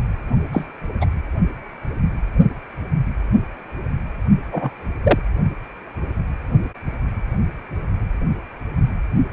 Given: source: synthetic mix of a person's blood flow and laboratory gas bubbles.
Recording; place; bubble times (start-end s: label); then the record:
Doppler ultrasound of blood flow; precordium
0.52-0.67 s: bubbles
1.01-1.05 s: bubbles
4.51-4.71 s: bubbles
5.03-5.19 s: bubbles
From the record:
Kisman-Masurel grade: 123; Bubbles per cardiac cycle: 1 to 2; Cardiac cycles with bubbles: 10 to 50%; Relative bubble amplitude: loud (0.450 to 0.775); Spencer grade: 2 (many but less than half of the cardiac periods contain bubble signals, singularly or in groups); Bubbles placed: only in the low amplitude regions of the cardiac cycle